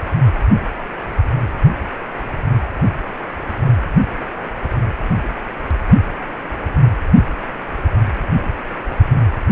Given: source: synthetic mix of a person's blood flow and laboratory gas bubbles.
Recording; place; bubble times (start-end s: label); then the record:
Doppler ultrasound of blood flow; precordium
3.65-3.72 s: bubbles
5.22-5.30 s: bubbles
8.90-9.00 s: bubbles
From the record:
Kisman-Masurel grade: 121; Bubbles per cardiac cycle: 1 to 2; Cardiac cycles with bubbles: 10 to 50%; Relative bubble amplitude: barely perceptible (0.100 to 0.250); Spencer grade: 2 (many but less than half of the cardiac periods contain bubble signals, singularly or in groups); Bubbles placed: anywhere in the cardiac cycle